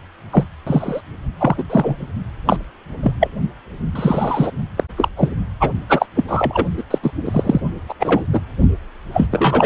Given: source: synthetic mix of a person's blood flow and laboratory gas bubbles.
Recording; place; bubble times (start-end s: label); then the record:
Doppler ultrasound of blood flow; precordium
0.31-0.44 s: bubbles
0.67-1.00 s: bubbles
1.39-1.64 s: bubbles
1.69-2.06 s: bubbles
2.46-2.57 s: bubbles
3.03-3.13 s: bubbles
3.20-3.28 s: bubbles
3.95-4.51 s: bubbles
4.77-4.84 s: bubbles
4.97-5.08 s: bubbles
5.16-5.29 s: bubbles
5.60-5.72 s: bubbles
5.90-6.07 s: bubbles
6.15-6.24 s: bubbles
6.28-6.66 s: bubbles
6.77-6.83 s: bubbles
6.91-6.99 s: bubbles
7.03-7.12 s: bubbles
7.25-7.61 s: bubbles
7.88-7.94 s: bubbles
8.00-8.24 s: bubbles
8.32-8.40 s: bubbles
9.13-9.27 s: bubbles
9.31-9.65 s: bubbles
From the record:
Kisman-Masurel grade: 243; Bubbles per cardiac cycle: several, 3 to 8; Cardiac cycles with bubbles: 100%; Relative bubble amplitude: loud (0.450 to 0.775); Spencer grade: 3 (all of the cardiac periods contain showers or single bubble signals, but not dominating or overriding the cardiac motion signals); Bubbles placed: only in the low amplitude regions of the cardiac cycle